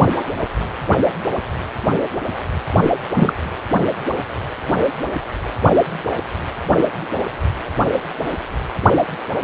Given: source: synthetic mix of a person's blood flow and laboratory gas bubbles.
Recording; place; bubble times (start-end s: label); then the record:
Doppler ultrasound of blood flow; precordium
2.83-2.92 s: bubbles
3.12-3.33 s: bubbles
From the record:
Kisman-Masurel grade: 213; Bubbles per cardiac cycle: several, 3 to 8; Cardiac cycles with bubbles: 1 to 10%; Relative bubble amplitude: loud (0.450 to 0.775); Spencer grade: 1 (occasional bubble signal discernible with the cardiac motion signal, with majority of cardiac periods free of bubbles); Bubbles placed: only in the low amplitude regions of the cardiac cycle